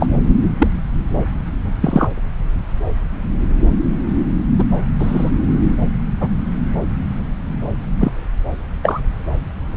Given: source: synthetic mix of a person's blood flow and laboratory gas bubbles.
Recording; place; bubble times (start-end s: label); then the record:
Doppler ultrasound of blood flow; subclavian vein
0.00-0.07 s: bubbles
0.58-0.68 s: bubbles
1.81-2.08 s: bubbles
4.58-4.64 s: bubbles
4.99-5.30 s: bubbles
6.20-6.29 s: bubbles
8.01-8.12 s: bubbles
8.82-9.00 s: bubbles
From the record:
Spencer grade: 2 (many but less than half of the cardiac periods contain bubble signals, singularly or in groups); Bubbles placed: anywhere in the cardiac cycle